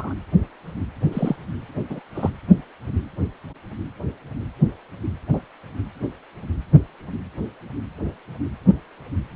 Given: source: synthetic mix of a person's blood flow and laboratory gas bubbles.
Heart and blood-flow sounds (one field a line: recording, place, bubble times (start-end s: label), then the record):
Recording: Doppler ultrasound of blood flow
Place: precordium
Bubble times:
0.00-0.14 s: bubbles
1.11-1.36 s: bubbles
1.90-1.99 s: bubbles
2.14-2.30 s: bubbles
5.33-5.40 s: bubbles
8.67-8.75 s: bubbles
From the record:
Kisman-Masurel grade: 122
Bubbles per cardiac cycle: 1 to 2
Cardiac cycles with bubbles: 10 to 50%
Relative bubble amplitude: moderate (0.250 to 0.450)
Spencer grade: 2 (many but less than half of the cardiac periods contain bubble signals, singularly or in groups)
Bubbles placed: anywhere in the cardiac cycle